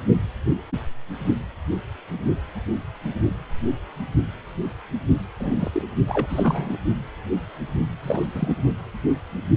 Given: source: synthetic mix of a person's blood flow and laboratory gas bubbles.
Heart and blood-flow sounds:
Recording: Doppler ultrasound of blood flow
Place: precordium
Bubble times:
5.39-5.83 s: bubbles
6.07-6.78 s: bubbles
8.03-8.27 s: bubbles
8.33-8.54 s: bubbles
From the record:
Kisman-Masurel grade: 222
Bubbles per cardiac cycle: several, 3 to 8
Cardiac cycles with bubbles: 10 to 50%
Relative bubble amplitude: moderate (0.250 to 0.450)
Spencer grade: 2 (many but less than half of the cardiac periods contain bubble signals, singularly or in groups)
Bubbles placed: only in the low amplitude regions of the cardiac cycle

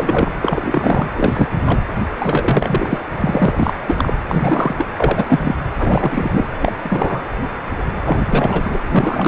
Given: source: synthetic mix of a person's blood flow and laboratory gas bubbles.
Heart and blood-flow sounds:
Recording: Doppler ultrasound of blood flow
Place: precordium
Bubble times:
0.00-0.32 s: bubbles
0.41-1.08 s: bubbles
1.15-1.49 s: bubbles
1.61-1.78 s: bubbles
2.19-2.98 s: bubbles
3.20-3.73 s: bubbles
3.86-4.13 s: bubbles
4.28-4.87 s: bubbles
4.98-5.56 s: bubbles
5.79-6.48 s: bubbles
6.54-6.73 s: bubbles
6.83-7.23 s: bubbles
8.04-9.28 s: bubbles
From the record:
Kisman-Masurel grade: 333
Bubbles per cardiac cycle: rolling drumbeat, 9 or more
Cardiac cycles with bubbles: 50 to 99%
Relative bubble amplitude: loud (0.450 to 0.775)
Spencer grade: 3 (all of the cardiac periods contain showers or single bubble signals, but not dominating or overriding the cardiac motion signals)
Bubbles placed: anywhere in the cardiac cycle

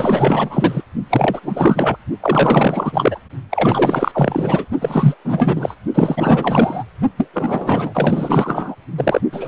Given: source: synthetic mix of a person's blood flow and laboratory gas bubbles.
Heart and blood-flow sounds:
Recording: Doppler ultrasound of blood flow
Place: precordium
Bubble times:
0.00-0.82 s: bubbles
1.10-1.40 s: bubbles
1.43-1.96 s: bubbles
2.21-3.19 s: bubbles
3.50-4.66 s: bubbles
4.81-5.16 s: bubbles
5.25-5.75 s: bubbles
5.94-6.83 s: bubbles
7.17-7.29 s: bubbles
7.33-8.75 s: bubbles
8.97-9.21 s: bubbles
9.32-9.48 s: bubbles
From the record:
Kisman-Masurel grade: 444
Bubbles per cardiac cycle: continuous sound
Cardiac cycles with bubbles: 100%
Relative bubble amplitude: maximal (0.775 to 0.999)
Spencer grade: 4 (maximum detectable bubble signal sounding continuously throughout systole and diastole of every cardiac period, and overriding the amplitude of the normal cardiac signals)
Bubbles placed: only in the low amplitude regions of the cardiac cycle

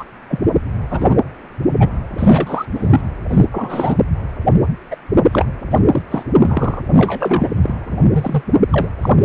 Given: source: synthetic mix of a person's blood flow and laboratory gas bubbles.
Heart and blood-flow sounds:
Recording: Doppler ultrasound of blood flow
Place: precordium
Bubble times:
0.00-0.05 s: bubbles
0.29-0.44 s: bubbles
0.90-1.15 s: bubbles
1.79-1.90 s: bubbles
2.18-2.65 s: bubbles
2.74-3.00 s: bubbles
3.29-3.46 s: bubbles
3.50-3.94 s: bubbles
4.91-4.96 s: bubbles
5.31-5.46 s: bubbles
5.71-5.79 s: bubbles
5.91-6.02 s: bubbles
6.10-6.23 s: bubbles
6.40-6.81 s: bubbles
6.97-7.49 s: bubbles
7.56-7.75 s: bubbles
7.91-7.99 s: bubbles
8.12-8.44 s: bubbles
8.70-8.88 s: bubbles
9.02-9.11 s: bubbles
9.21-9.25 s: bubbles
From the record:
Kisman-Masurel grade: 243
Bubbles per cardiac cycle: several, 3 to 8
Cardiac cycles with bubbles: 100%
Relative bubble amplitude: loud (0.450 to 0.775)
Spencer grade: 3 (all of the cardiac periods contain showers or single bubble signals, but not dominating or overriding the cardiac motion signals)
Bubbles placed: anywhere in the cardiac cycle

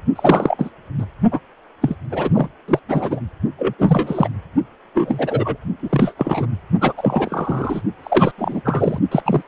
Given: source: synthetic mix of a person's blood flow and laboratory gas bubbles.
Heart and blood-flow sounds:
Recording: Doppler ultrasound of blood flow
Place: precordium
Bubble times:
0.15-0.70 s: bubbles
0.98-1.06 s: bubbles
1.31-1.40 s: bubbles
1.81-1.96 s: bubbles
2.11-2.48 s: bubbles
2.68-2.79 s: bubbles
2.88-3.21 s: bubbles
3.58-3.74 s: bubbles
3.78-4.28 s: bubbles
4.94-5.57 s: bubbles
5.82-6.14 s: bubbles
6.18-6.46 s: bubbles
6.81-6.93 s: bubbles
6.97-7.82 s: bubbles
8.03-8.31 s: bubbles
8.38-8.62 s: bubbles
8.64-8.99 s: bubbles
9.11-9.22 s: bubbles
9.25-9.42 s: bubbles
From the record:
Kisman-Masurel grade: 343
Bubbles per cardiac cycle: rolling drumbeat, 9 or more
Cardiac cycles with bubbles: 100%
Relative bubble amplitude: loud (0.450 to 0.775)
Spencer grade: 3 (all of the cardiac periods contain showers or single bubble signals, but not dominating or overriding the cardiac motion signals)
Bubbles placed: only in the low amplitude regions of the cardiac cycle

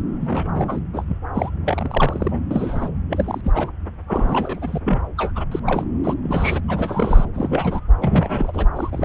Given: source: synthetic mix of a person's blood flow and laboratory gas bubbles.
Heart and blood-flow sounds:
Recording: Doppler ultrasound of blood flow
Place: subclavian vein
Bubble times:
0.20-0.80 s: bubbles
0.93-1.04 s: bubbles
1.07-1.16 s: bubbles
1.34-1.50 s: bubbles
1.65-2.44 s: bubbles
2.50-2.89 s: bubbles
3.09-3.41 s: bubbles
3.43-3.71 s: bubbles
4.06-4.79 s: bubbles
4.83-4.98 s: bubbles
5.17-5.31 s: bubbles
5.35-5.45 s: bubbles
5.51-5.59 s: bubbles
5.66-5.84 s: bubbles
6.04-6.14 s: bubbles
6.23-6.60 s: bubbles
6.68-7.25 s: bubbles
7.34-7.81 s: bubbles
8.01-8.66 s: bubbles
8.75-9.05 s: bubbles
From the record:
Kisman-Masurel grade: 332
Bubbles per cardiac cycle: rolling drumbeat, 9 or more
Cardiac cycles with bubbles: 50 to 99%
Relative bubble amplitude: moderate (0.250 to 0.450)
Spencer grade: 3 (all of the cardiac periods contain showers or single bubble signals, but not dominating or overriding the cardiac motion signals)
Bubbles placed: anywhere in the cardiac cycle

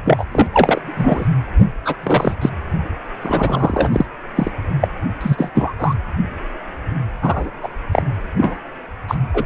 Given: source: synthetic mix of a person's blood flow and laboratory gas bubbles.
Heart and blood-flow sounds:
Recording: Doppler ultrasound of blood flow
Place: precordium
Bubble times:
0.04-0.24 s: bubbles
0.32-0.46 s: bubbles
0.54-1.27 s: bubbles
1.85-1.96 s: bubbles
2.03-2.35 s: bubbles
2.41-2.50 s: bubbles
3.21-4.05 s: bubbles
4.35-4.51 s: bubbles
4.81-4.88 s: bubbles
5.21-5.51 s: bubbles
5.54-5.72 s: bubbles
5.79-5.95 s: bubbles
7.22-7.50 s: bubbles
7.62-7.68 s: bubbles
7.92-8.02 s: bubbles
8.37-8.57 s: bubbles
9.08-9.15 s: bubbles
9.34-9.45 s: bubbles
From the record:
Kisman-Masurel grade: 243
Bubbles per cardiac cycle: several, 3 to 8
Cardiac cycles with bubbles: 100%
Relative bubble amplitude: loud (0.450 to 0.775)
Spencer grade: 3 (all of the cardiac periods contain showers or single bubble signals, but not dominating or overriding the cardiac motion signals)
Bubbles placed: anywhere in the cardiac cycle

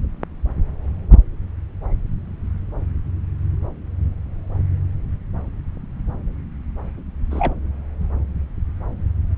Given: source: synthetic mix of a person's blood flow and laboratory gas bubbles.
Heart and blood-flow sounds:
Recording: Doppler ultrasound of blood flow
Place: subclavian vein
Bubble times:
7.31-7.54 s: bubbles
From the record:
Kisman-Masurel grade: 122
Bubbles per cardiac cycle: 1 to 2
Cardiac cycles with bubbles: 10 to 50%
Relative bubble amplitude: moderate (0.250 to 0.450)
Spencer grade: 2 (many but less than half of the cardiac periods contain bubble signals, singularly or in groups)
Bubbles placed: anywhere in the cardiac cycle

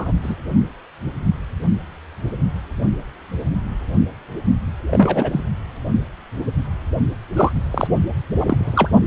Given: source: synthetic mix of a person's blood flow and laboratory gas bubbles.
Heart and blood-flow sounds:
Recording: Doppler ultrasound of blood flow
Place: precordium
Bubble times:
0.00-0.12 s: bubbles
0.22-0.35 s: bubbles
4.91-5.41 s: bubbles
7.36-7.52 s: bubbles
7.71-7.88 s: bubbles
8.39-8.89 s: bubbles
From the record:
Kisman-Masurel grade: 223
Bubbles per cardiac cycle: several, 3 to 8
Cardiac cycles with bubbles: 10 to 50%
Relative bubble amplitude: loud (0.450 to 0.775)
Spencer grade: 2 (many but less than half of the cardiac periods contain bubble signals, singularly or in groups)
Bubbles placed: anywhere in the cardiac cycle

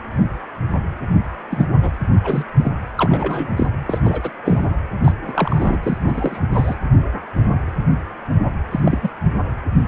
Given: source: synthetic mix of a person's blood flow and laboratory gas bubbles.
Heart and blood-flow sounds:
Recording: Doppler ultrasound of blood flow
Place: precordium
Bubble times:
1.50-1.67 s: bubbles
1.81-1.95 s: bubbles
2.23-2.45 s: bubbles
2.56-2.72 s: bubbles
2.98-3.67 s: bubbles
3.88-4.00 s: bubbles
4.03-4.35 s: bubbles
4.45-4.70 s: bubbles
5.04-5.12 s: bubbles
5.27-5.78 s: bubbles
5.83-5.98 s: bubbles
6.02-6.46 s: bubbles
6.52-6.75 s: bubbles
8.71-8.80 s: bubbles
8.86-8.98 s: bubbles
9.03-9.10 s: bubbles
From the record:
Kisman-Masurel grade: 232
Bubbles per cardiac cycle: several, 3 to 8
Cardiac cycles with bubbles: 50 to 99%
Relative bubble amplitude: moderate (0.250 to 0.450)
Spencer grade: 3 (all of the cardiac periods contain showers or single bubble signals, but not dominating or overriding the cardiac motion signals)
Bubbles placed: anywhere in the cardiac cycle

